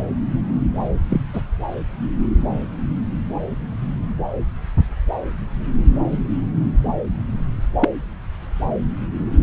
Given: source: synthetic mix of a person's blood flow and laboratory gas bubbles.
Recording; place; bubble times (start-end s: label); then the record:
Doppler ultrasound of blood flow; subclavian vein
1.09-1.21 s: bubbles
1.33-1.42 s: bubbles
7.80-7.89 s: bubbles
From the record:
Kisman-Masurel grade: 122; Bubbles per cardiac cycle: 1 to 2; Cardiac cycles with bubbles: 10 to 50%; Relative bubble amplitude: moderate (0.250 to 0.450); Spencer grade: 2 (many but less than half of the cardiac periods contain bubble signals, singularly or in groups); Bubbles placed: anywhere in the cardiac cycle